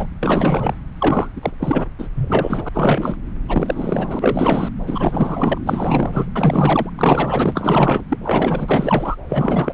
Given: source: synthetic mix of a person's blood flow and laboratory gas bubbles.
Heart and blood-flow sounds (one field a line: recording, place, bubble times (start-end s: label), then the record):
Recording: Doppler ultrasound of blood flow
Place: subclavian vein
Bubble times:
0.00-0.06 s: bubbles
0.20-0.74 s: bubbles
0.99-1.30 s: bubbles
1.35-1.52 s: bubbles
1.59-1.89 s: bubbles
1.98-2.09 s: bubbles
2.14-2.69 s: bubbles
2.73-3.17 s: bubbles
3.48-4.70 s: bubbles
4.87-5.58 s: bubbles
5.66-6.33 s: bubbles
6.36-6.90 s: bubbles
6.97-8.03 s: bubbles
8.09-8.17 s: bubbles
8.23-9.15 s: bubbles
9.29-9.73 s: bubbles
From the record:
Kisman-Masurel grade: 444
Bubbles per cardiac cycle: continuous sound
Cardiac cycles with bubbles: 100%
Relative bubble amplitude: maximal (0.775 to 0.999)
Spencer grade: 4 (maximum detectable bubble signal sounding continuously throughout systole and diastole of every cardiac period, and overriding the amplitude of the normal cardiac signals)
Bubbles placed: anywhere in the cardiac cycle